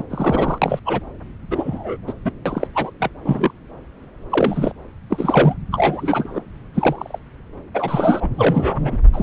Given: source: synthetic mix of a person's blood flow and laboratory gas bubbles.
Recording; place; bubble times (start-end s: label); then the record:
Doppler ultrasound of blood flow; subclavian vein
0.00-0.03 s: bubbles
0.10-0.58 s: bubbles
0.61-0.80 s: bubbles
0.85-1.00 s: bubbles
1.51-1.96 s: bubbles
2.07-2.14 s: bubbles
2.25-2.31 s: bubbles
2.46-2.67 s: bubbles
2.75-2.91 s: bubbles
2.99-3.10 s: bubbles
3.25-3.53 s: bubbles
4.29-4.71 s: bubbles
5.09-5.54 s: bubbles
5.71-6.42 s: bubbles
6.74-7.18 s: bubbles
7.74-8.30 s: bubbles
8.37-8.97 s: bubbles
9.13-9.23 s: bubbles
From the record:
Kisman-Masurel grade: 243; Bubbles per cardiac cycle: several, 3 to 8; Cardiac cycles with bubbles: 100%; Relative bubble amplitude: loud (0.450 to 0.775); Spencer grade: 3 (all of the cardiac periods contain showers or single bubble signals, but not dominating or overriding the cardiac motion signals); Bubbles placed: anywhere in the cardiac cycle